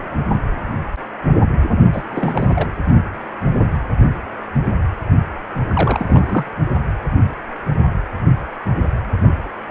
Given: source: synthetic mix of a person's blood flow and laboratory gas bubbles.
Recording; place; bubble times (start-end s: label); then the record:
Doppler ultrasound of blood flow; precordium
1.93-2.71 s: bubbles
5.67-6.50 s: bubbles
From the record:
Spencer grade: 2 (many but less than half of the cardiac periods contain bubble signals, singularly or in groups); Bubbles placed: only in the low amplitude regions of the cardiac cycle